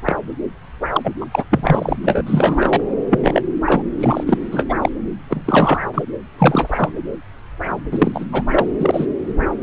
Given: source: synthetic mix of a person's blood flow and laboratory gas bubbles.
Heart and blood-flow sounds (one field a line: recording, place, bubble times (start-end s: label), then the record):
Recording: Doppler ultrasound of blood flow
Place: subclavian vein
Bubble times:
0.06-0.17 s: bubbles
0.92-1.14 s: bubbles
1.21-1.26 s: bubbles
1.31-1.44 s: bubbles
1.51-1.97 s: bubbles
2.04-2.22 s: bubbles
2.26-2.80 s: bubbles
3.10-3.41 s: bubbles
3.65-3.82 s: bubbles
3.99-4.38 s: bubbles
4.51-4.75 s: bubbles
4.83-4.90 s: bubbles
5.29-5.86 s: bubbles
5.94-6.03 s: bubbles
6.39-6.92 s: bubbles
7.91-8.25 s: bubbles
8.32-8.43 s: bubbles
8.51-8.66 s: bubbles
8.79-9.06 s: bubbles
From the record:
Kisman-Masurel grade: 233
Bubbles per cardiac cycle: several, 3 to 8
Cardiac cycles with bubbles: 50 to 99%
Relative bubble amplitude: loud (0.450 to 0.775)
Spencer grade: 3 (all of the cardiac periods contain showers or single bubble signals, but not dominating or overriding the cardiac motion signals)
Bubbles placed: anywhere in the cardiac cycle